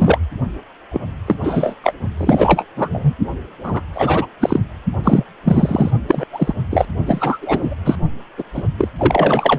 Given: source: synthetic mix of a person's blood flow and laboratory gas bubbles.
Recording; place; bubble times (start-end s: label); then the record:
Doppler ultrasound of blood flow; precordium
0.00-0.18 s: bubbles
0.91-1.00 s: bubbles
1.26-1.36 s: bubbles
1.41-1.74 s: bubbles
1.83-1.93 s: bubbles
2.17-2.65 s: bubbles
2.76-2.89 s: bubbles
2.92-3.14 s: bubbles
3.63-3.81 s: bubbles
3.94-4.26 s: bubbles
4.40-4.60 s: bubbles
5.04-5.24 s: bubbles
5.45-5.91 s: bubbles
6.08-6.25 s: bubbles
6.33-6.53 s: bubbles
6.71-6.85 s: bubbles
7.06-7.38 s: bubbles
7.42-7.74 s: bubbles
7.84-7.96 s: bubbles
8.38-8.43 s: bubbles
8.54-8.63 s: bubbles
8.77-8.88 s: bubbles
8.98-9.59 s: bubbles
From the record:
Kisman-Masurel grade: 243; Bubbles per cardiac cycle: several, 3 to 8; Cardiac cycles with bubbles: 100%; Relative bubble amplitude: loud (0.450 to 0.775); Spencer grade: 3 (all of the cardiac periods contain showers or single bubble signals, but not dominating or overriding the cardiac motion signals); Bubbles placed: only in the low amplitude regions of the cardiac cycle